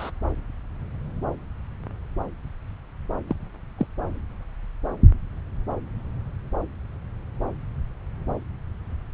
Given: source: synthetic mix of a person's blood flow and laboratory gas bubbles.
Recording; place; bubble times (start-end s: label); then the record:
Doppler ultrasound of blood flow; subclavian vein
0.00-0.10 s: bubbles
3.27-3.36 s: bubbles
3.79-3.87 s: bubbles
From the record:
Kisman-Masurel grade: 122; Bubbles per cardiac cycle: 1 to 2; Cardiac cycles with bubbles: 10 to 50%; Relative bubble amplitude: moderate (0.250 to 0.450); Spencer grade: 2 (many but less than half of the cardiac periods contain bubble signals, singularly or in groups); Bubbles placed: anywhere in the cardiac cycle